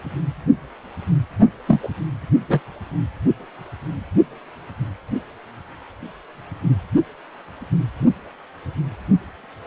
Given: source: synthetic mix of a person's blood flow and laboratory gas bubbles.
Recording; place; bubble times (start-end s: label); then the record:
Doppler ultrasound of blood flow; precordium
1.67-1.88 s: bubbles
2.48-2.60 s: bubbles
From the record:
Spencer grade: 1 (occasional bubble signal discernible with the cardiac motion signal, with majority of cardiac periods free of bubbles); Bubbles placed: only in the low amplitude regions of the cardiac cycle